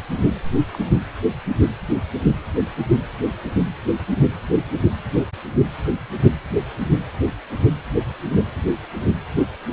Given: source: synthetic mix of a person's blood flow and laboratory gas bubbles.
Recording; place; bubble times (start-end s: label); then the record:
Doppler ultrasound of blood flow; precordium
0.73-0.78 s: bubbles
0.80-0.91 s: bubbles
From the record:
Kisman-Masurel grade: 211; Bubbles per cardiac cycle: several, 3 to 8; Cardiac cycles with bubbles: 1 to 10%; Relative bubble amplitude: barely perceptible (0.100 to 0.250); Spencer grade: 1 (occasional bubble signal discernible with the cardiac motion signal, with majority of cardiac periods free of bubbles); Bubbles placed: anywhere in the cardiac cycle